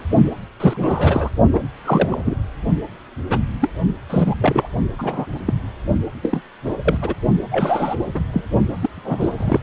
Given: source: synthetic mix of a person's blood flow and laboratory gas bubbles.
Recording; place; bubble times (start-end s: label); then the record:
Doppler ultrasound of blood flow; precordium
0.60-1.30 s: bubbles
1.53-1.60 s: bubbles
1.84-2.35 s: bubbles
3.29-3.39 s: bubbles
3.61-3.70 s: bubbles
4.10-4.35 s: bubbles
4.41-4.67 s: bubbles
4.99-5.27 s: bubbles
5.45-5.54 s: bubbles
6.23-6.42 s: bubbles
6.64-6.74 s: bubbles
6.84-6.99 s: bubbles
7.02-7.15 s: bubbles
7.50-7.96 s: bubbles
8.13-8.21 s: bubbles
8.34-8.42 s: bubbles
8.81-8.89 s: bubbles
8.96-9.60 s: bubbles
From the record:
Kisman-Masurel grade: 242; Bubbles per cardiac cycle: several, 3 to 8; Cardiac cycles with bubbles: 100%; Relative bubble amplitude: moderate (0.250 to 0.450); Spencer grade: 3 (all of the cardiac periods contain showers or single bubble signals, but not dominating or overriding the cardiac motion signals); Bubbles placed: only in the low amplitude regions of the cardiac cycle